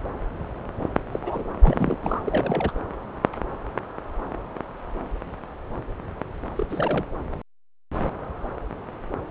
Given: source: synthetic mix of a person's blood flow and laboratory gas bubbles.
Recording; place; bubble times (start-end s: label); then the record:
Doppler ultrasound of blood flow; subclavian vein
1.11-1.44 s: bubbles
1.61-1.98 s: bubbles
2.03-2.71 s: bubbles
6.55-6.67 s: bubbles
6.70-7.06 s: bubbles
From the record:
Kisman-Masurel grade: 221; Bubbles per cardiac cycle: several, 3 to 8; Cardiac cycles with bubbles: 10 to 50%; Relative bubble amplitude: barely perceptible (0.100 to 0.250); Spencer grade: 2 (many but less than half of the cardiac periods contain bubble signals, singularly or in groups); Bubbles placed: anywhere in the cardiac cycle